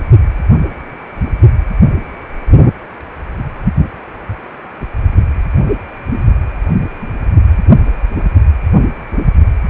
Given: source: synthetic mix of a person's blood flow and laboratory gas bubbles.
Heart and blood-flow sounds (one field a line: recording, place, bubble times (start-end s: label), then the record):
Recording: Doppler ultrasound of blood flow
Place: precordium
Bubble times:
3.83-3.89 s: bubbles
From the record:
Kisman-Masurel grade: 111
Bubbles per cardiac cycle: 1 to 2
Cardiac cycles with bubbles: 1 to 10%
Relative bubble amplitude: barely perceptible (0.100 to 0.250)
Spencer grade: 1 (occasional bubble signal discernible with the cardiac motion signal, with majority of cardiac periods free of bubbles)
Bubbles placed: only in the low amplitude regions of the cardiac cycle